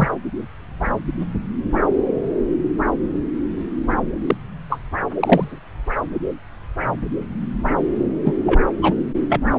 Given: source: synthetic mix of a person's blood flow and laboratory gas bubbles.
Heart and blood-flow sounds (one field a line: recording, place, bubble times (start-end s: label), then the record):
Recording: Doppler ultrasound of blood flow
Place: subclavian vein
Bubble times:
0.00-0.08 s: bubbles
4.27-4.36 s: bubbles
4.70-4.79 s: bubbles
5.20-5.60 s: bubbles
8.24-8.36 s: bubbles
8.46-8.61 s: bubbles
8.81-8.93 s: bubbles
9.29-9.40 s: bubbles
From the record:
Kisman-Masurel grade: 123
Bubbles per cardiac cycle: 1 to 2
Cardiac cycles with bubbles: 10 to 50%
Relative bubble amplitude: loud (0.450 to 0.775)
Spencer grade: 2 (many but less than half of the cardiac periods contain bubble signals, singularly or in groups)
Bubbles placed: anywhere in the cardiac cycle